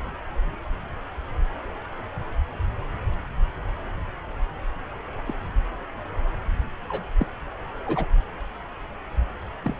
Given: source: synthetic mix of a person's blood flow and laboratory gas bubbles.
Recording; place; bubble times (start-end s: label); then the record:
Doppler ultrasound of blood flow; subclavian vein
5.25-5.33 s: bubbles
6.88-7.04 s: bubbles
7.19-7.27 s: bubbles
7.86-8.06 s: bubbles
9.64-9.74 s: bubbles
From the record:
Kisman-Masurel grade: 121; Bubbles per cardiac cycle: 1 to 2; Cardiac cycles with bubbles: 10 to 50%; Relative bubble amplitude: barely perceptible (0.100 to 0.250); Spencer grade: 2 (many but less than half of the cardiac periods contain bubble signals, singularly or in groups); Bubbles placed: anywhere in the cardiac cycle